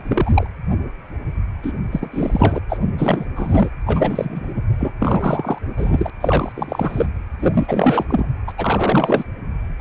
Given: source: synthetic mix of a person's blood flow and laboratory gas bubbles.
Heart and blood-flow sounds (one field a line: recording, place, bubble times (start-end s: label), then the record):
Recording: Doppler ultrasound of blood flow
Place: precordium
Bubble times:
0.00-0.02 s: bubbles
0.05-0.47 s: bubbles
1.62-1.72 s: bubbles
1.91-2.09 s: bubbles
2.11-2.60 s: bubbles
2.69-2.78 s: bubbles
2.98-3.25 s: bubbles
3.35-3.69 s: bubbles
3.86-4.62 s: bubbles
4.79-4.92 s: bubbles
4.99-5.58 s: bubbles
5.77-6.10 s: bubbles
6.21-7.07 s: bubbles
7.39-8.05 s: bubbles
8.09-8.27 s: bubbles
8.47-8.52 s: bubbles
8.58-9.24 s: bubbles
9.79-9.81 s: bubbles
From the record:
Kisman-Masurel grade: 333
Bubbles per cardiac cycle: rolling drumbeat, 9 or more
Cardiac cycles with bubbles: 50 to 99%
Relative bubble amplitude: loud (0.450 to 0.775)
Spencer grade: 3 (all of the cardiac periods contain showers or single bubble signals, but not dominating or overriding the cardiac motion signals)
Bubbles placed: anywhere in the cardiac cycle